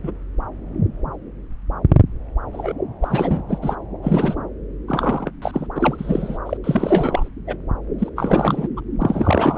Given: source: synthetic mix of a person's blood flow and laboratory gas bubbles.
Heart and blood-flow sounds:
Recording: Doppler ultrasound of blood flow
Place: subclavian vein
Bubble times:
0.03-0.11 s: bubbles
2.51-2.73 s: bubbles
3.01-3.42 s: bubbles
3.48-3.58 s: bubbles
3.61-3.75 s: bubbles
4.02-4.35 s: bubbles
4.87-5.31 s: bubbles
5.42-5.67 s: bubbles
5.75-6.38 s: bubbles
6.46-6.57 s: bubbles
6.63-7.29 s: bubbles
7.47-7.56 s: bubbles
7.98-8.10 s: bubbles
8.16-8.68 s: bubbles
8.77-8.81 s: bubbles
9.01-9.58 s: bubbles
From the record:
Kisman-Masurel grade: 333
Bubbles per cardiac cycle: rolling drumbeat, 9 or more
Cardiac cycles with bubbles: 50 to 99%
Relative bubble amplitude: loud (0.450 to 0.775)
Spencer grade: 3 (all of the cardiac periods contain showers or single bubble signals, but not dominating or overriding the cardiac motion signals)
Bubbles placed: anywhere in the cardiac cycle

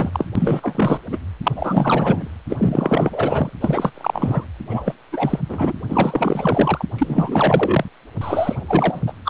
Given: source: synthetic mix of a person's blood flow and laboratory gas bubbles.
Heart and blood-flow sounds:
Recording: Doppler ultrasound of blood flow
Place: precordium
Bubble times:
0.00-0.25 s: bubbles
0.35-0.99 s: bubbles
1.10-1.18 s: bubbles
1.43-1.52 s: bubbles
1.55-2.30 s: bubbles
2.49-3.50 s: bubbles
3.60-4.46 s: bubbles
4.69-4.94 s: bubbles
5.12-5.39 s: bubbles
5.48-5.73 s: bubbles
5.88-6.85 s: bubbles
6.98-7.84 s: bubbles
8.21-9.02 s: bubbles
9.07-9.13 s: bubbles
9.25-9.30 s: bubbles
From the record:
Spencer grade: 4 (maximum detectable bubble signal sounding continuously throughout systole and diastole of every cardiac period, and overriding the amplitude of the normal cardiac signals)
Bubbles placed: anywhere in the cardiac cycle

